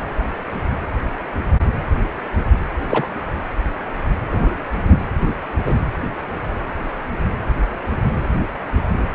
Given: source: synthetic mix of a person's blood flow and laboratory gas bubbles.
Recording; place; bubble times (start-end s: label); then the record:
Doppler ultrasound of blood flow; precordium
2.90-3.07 s: bubbles
4.31-4.55 s: bubbles
4.71-4.98 s: bubbles
5.25-5.33 s: bubbles
5.66-5.75 s: bubbles
From the record:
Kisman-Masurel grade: 123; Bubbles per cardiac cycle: 1 to 2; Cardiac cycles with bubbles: 10 to 50%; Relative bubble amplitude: loud (0.450 to 0.775); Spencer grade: 2 (many but less than half of the cardiac periods contain bubble signals, singularly or in groups); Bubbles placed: anywhere in the cardiac cycle